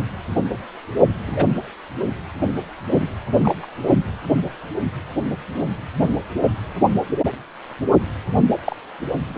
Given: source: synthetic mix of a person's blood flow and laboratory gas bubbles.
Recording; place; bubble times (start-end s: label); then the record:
Doppler ultrasound of blood flow; precordium
1.26-1.46 s: bubbles
2.92-3.06 s: bubbles
3.35-3.68 s: bubbles
6.00-6.10 s: bubbles
8.65-8.76 s: bubbles
9.34-9.38 s: bubbles
From the record:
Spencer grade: 2 (many but less than half of the cardiac periods contain bubble signals, singularly or in groups); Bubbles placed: anywhere in the cardiac cycle